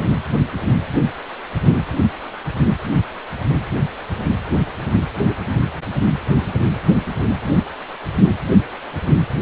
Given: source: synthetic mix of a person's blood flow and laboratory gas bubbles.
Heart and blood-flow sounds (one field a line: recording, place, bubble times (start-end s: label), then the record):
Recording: Doppler ultrasound of blood flow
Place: precordium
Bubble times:
no bubbles
From the record:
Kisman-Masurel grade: 000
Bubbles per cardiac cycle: 0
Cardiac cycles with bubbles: 0%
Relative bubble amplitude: no bubbles discernible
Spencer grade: 0 (complete lack of bubble signals)